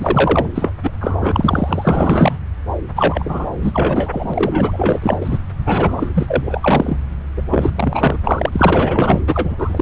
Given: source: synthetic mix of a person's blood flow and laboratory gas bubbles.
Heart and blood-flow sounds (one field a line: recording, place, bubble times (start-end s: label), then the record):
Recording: Doppler ultrasound of blood flow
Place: subclavian vein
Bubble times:
0.00-0.50 s: bubbles
0.55-0.72 s: bubbles
0.82-0.92 s: bubbles
1.00-2.38 s: bubbles
2.96-3.50 s: bubbles
3.62-5.38 s: bubbles
5.64-6.10 s: bubbles
6.14-7.02 s: bubbles
7.37-7.42 s: bubbles
7.50-7.70 s: bubbles
7.75-8.18 s: bubbles
8.24-8.49 s: bubbles
8.52-9.21 s: bubbles
9.27-9.54 s: bubbles
9.57-9.82 s: bubbles
From the record:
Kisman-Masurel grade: 444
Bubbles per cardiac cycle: continuous sound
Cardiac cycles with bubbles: 100%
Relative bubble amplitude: maximal (0.775 to 0.999)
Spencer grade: 4 (maximum detectable bubble signal sounding continuously throughout systole and diastole of every cardiac period, and overriding the amplitude of the normal cardiac signals)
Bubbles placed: anywhere in the cardiac cycle